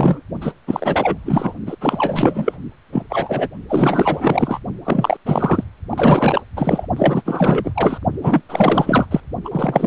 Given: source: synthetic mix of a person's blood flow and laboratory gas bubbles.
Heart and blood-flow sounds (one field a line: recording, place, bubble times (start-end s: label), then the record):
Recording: Doppler ultrasound of blood flow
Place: precordium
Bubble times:
0.00-0.21 s: bubbles
0.40-0.52 s: bubbles
0.67-1.18 s: bubbles
1.25-1.53 s: bubbles
1.66-1.75 s: bubbles
1.80-2.56 s: bubbles
2.92-3.04 s: bubbles
3.10-3.48 s: bubbles
3.69-4.60 s: bubbles
4.85-5.17 s: bubbles
5.26-5.64 s: bubbles
5.90-6.42 s: bubbles
6.56-6.87 s: bubbles
6.97-7.22 s: bubbles
7.25-7.98 s: bubbles
8.22-8.43 s: bubbles
8.49-9.07 s: bubbles
9.11-9.20 s: bubbles
9.45-9.86 s: bubbles
From the record:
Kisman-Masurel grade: 444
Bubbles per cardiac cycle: continuous sound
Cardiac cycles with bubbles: 100%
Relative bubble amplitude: maximal (0.775 to 0.999)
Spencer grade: 4 (maximum detectable bubble signal sounding continuously throughout systole and diastole of every cardiac period, and overriding the amplitude of the normal cardiac signals)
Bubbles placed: only in the low amplitude regions of the cardiac cycle